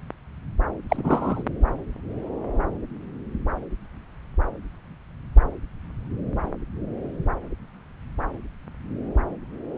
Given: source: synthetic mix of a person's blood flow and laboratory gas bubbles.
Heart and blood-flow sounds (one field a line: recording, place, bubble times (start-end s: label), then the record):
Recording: Doppler ultrasound of blood flow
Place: subclavian vein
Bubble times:
0.89-1.43 s: bubbles
From the record:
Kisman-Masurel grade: 212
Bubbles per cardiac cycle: several, 3 to 8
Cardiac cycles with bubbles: 1 to 10%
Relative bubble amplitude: moderate (0.250 to 0.450)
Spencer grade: 1 (occasional bubble signal discernible with the cardiac motion signal, with majority of cardiac periods free of bubbles)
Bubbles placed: anywhere in the cardiac cycle